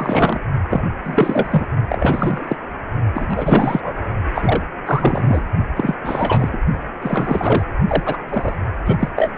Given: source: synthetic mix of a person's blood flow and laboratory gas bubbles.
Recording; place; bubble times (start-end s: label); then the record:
Doppler ultrasound of blood flow; precordium
0.00-0.40 s: bubbles
0.69-0.85 s: bubbles
1.04-1.67 s: bubbles
1.89-2.56 s: bubbles
3.15-3.99 s: bubbles
4.34-4.62 s: bubbles
4.86-5.43 s: bubbles
5.76-5.96 s: bubbles
6.01-6.58 s: bubbles
7.01-7.65 s: bubbles
7.88-8.17 s: bubbles
8.29-8.54 s: bubbles
8.86-9.09 s: bubbles
9.15-9.30 s: bubbles
9.36-9.38 s: bubbles
From the record:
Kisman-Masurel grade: 343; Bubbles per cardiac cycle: rolling drumbeat, 9 or more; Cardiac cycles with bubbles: 100%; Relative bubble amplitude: loud (0.450 to 0.775); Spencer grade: 3 (all of the cardiac periods contain showers or single bubble signals, but not dominating or overriding the cardiac motion signals); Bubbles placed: only in the low amplitude regions of the cardiac cycle